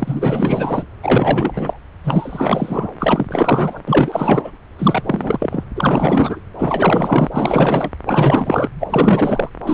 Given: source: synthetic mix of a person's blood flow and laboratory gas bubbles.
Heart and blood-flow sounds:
Doppler ultrasound of blood flow; subclavian vein
0.00-0.86 s: bubbles
1.02-1.79 s: bubbles
2.04-2.88 s: bubbles
2.99-3.81 s: bubbles
3.88-4.51 s: bubbles
4.78-5.63 s: bubbles
5.75-6.41 s: bubbles
6.58-7.91 s: bubbles
8.05-8.69 s: bubbles
8.80-9.49 s: bubbles
9.63-9.74 s: bubbles
From the record:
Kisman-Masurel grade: 444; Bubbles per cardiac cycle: continuous sound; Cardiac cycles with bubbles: 100%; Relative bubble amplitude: maximal (0.775 to 0.999); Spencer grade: 4 (maximum detectable bubble signal sounding continuously throughout systole and diastole of every cardiac period, and overriding the amplitude of the normal cardiac signals); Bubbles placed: anywhere in the cardiac cycle

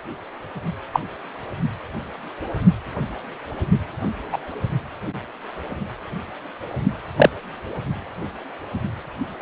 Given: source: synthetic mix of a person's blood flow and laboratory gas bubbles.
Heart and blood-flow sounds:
Doppler ultrasound of blood flow; precordium
0.93-1.00 s: bubbles
4.32-4.38 s: bubbles
7.17-7.29 s: bubbles
9.39-9.41 s: bubbles
From the record:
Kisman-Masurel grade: 123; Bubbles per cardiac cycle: 1 to 2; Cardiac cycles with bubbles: 10 to 50%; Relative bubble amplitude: loud (0.450 to 0.775); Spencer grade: 2 (many but less than half of the cardiac periods contain bubble signals, singularly or in groups); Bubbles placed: only in the low amplitude regions of the cardiac cycle

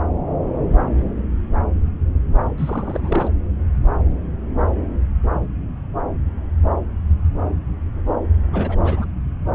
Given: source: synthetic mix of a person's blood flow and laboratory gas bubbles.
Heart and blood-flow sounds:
Doppler ultrasound of blood flow; subclavian vein
2.58-3.31 s: bubbles
8.52-9.07 s: bubbles
From the record:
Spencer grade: 2 (many but less than half of the cardiac periods contain bubble signals, singularly or in groups); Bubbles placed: anywhere in the cardiac cycle

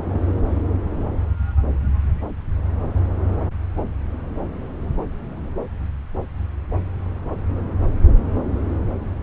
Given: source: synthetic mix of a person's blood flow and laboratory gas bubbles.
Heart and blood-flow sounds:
Doppler ultrasound of blood flow; subclavian vein
0.00-0.05 s: bubbles
0.12-0.20 s: bubbles
From the record:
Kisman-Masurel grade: 211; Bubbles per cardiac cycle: several, 3 to 8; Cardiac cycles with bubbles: 1 to 10%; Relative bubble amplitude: barely perceptible (0.100 to 0.250); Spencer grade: 1 (occasional bubble signal discernible with the cardiac motion signal, with majority of cardiac periods free of bubbles); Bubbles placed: anywhere in the cardiac cycle

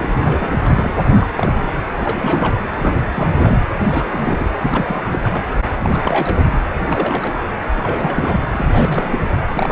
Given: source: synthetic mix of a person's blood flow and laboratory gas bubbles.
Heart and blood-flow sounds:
Doppler ultrasound of blood flow; precordium
0.00-1.07 s: bubbles
1.09-1.71 s: bubbles
1.97-2.56 s: bubbles
2.77-2.96 s: bubbles
3.12-3.57 s: bubbles
3.90-4.50 s: bubbles
4.60-5.02 s: bubbles
5.04-5.19 s: bubbles
5.23-5.45 s: bubbles
5.62-5.67 s: bubbles
5.71-6.46 s: bubbles
6.78-7.40 s: bubbles
7.74-8.40 s: bubbles
8.50-9.20 s: bubbles
9.54-9.72 s: bubbles
From the record:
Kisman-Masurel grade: 342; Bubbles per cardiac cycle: rolling drumbeat, 9 or more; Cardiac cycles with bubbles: 100%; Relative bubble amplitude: moderate (0.250 to 0.450); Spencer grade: 3 (all of the cardiac periods contain showers or single bubble signals, but not dominating or overriding the cardiac motion signals); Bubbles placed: anywhere in the cardiac cycle

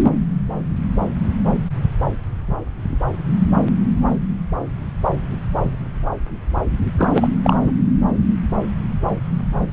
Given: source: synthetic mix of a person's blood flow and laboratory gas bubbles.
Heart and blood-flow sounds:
Doppler ultrasound of blood flow; subclavian vein
6.98-7.10 s: bubbles
7.14-7.28 s: bubbles
7.43-7.57 s: bubbles
7.67-7.72 s: bubbles
From the record:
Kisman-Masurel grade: 212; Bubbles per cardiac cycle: several, 3 to 8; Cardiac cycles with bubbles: 1 to 10%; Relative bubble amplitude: moderate (0.250 to 0.450); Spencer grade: 1 (occasional bubble signal discernible with the cardiac motion signal, with majority of cardiac periods free of bubbles); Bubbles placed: anywhere in the cardiac cycle

